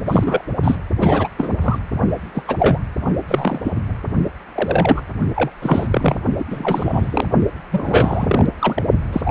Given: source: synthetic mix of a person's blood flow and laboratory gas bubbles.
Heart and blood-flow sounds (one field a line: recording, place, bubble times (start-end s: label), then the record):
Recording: Doppler ultrasound of blood flow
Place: precordium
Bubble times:
0.06-0.42 s: bubbles
0.62-0.75 s: bubbles
0.98-1.28 s: bubbles
1.38-1.56 s: bubbles
1.61-1.79 s: bubbles
2.35-2.42 s: bubbles
2.47-2.79 s: bubbles
3.28-3.71 s: bubbles
4.54-5.02 s: bubbles
5.36-5.50 s: bubbles
5.62-5.88 s: bubbles
5.90-6.16 s: bubbles
6.38-6.45 s: bubbles
6.50-7.28 s: bubbles
7.71-8.46 s: bubbles
8.59-8.86 s: bubbles
9.12-9.31 s: bubbles
From the record:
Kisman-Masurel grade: 243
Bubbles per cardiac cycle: several, 3 to 8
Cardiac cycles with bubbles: 100%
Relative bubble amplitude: loud (0.450 to 0.775)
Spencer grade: 3 (all of the cardiac periods contain showers or single bubble signals, but not dominating or overriding the cardiac motion signals)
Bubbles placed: only in the low amplitude regions of the cardiac cycle